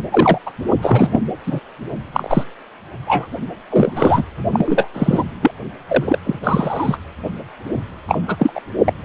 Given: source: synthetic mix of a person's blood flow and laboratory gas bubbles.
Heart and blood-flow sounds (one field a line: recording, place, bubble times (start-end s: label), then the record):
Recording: Doppler ultrasound of blood flow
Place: precordium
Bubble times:
0.10-0.38 s: bubbles
0.46-0.50 s: bubbles
0.81-1.20 s: bubbles
1.47-1.60 s: bubbles
2.14-2.44 s: bubbles
3.06-3.27 s: bubbles
3.70-4.23 s: bubbles
4.52-4.88 s: bubbles
4.93-5.24 s: bubbles
5.42-5.51 s: bubbles
5.88-6.18 s: bubbles
6.25-6.40 s: bubbles
6.43-6.97 s: bubbles
8.08-8.21 s: bubbles
8.27-8.36 s: bubbles
8.39-8.60 s: bubbles
8.85-8.93 s: bubbles
From the record:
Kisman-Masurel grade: 243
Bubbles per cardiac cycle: several, 3 to 8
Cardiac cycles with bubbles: 100%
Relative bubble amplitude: loud (0.450 to 0.775)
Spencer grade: 3 (all of the cardiac periods contain showers or single bubble signals, but not dominating or overriding the cardiac motion signals)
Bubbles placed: only in the low amplitude regions of the cardiac cycle